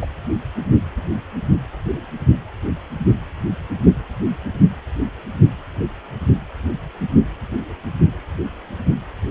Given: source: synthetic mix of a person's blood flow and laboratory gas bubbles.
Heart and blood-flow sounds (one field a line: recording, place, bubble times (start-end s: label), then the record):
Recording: Doppler ultrasound of blood flow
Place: precordium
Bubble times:
0.01-0.05 s: bubbles
From the record:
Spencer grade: 1 (occasional bubble signal discernible with the cardiac motion signal, with majority of cardiac periods free of bubbles)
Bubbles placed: anywhere in the cardiac cycle